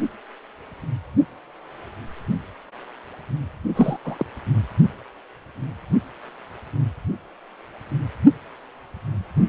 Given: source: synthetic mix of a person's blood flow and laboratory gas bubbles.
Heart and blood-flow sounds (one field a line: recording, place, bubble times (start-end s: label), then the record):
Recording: Doppler ultrasound of blood flow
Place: precordium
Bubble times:
3.75-3.97 s: bubbles
4.04-4.25 s: bubbles
From the record:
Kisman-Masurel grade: 212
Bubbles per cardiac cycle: several, 3 to 8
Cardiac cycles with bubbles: 1 to 10%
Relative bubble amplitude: moderate (0.250 to 0.450)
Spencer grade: 1 (occasional bubble signal discernible with the cardiac motion signal, with majority of cardiac periods free of bubbles)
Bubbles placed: only in the low amplitude regions of the cardiac cycle